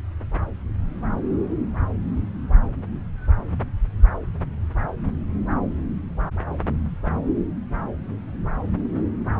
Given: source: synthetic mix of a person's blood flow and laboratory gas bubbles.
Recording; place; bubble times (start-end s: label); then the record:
Doppler ultrasound of blood flow; subclavian vein
no bubbles
From the record:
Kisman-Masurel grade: 000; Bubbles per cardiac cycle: 0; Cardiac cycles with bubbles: 0%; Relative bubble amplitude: no bubbles discernible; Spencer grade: 0 (complete lack of bubble signals)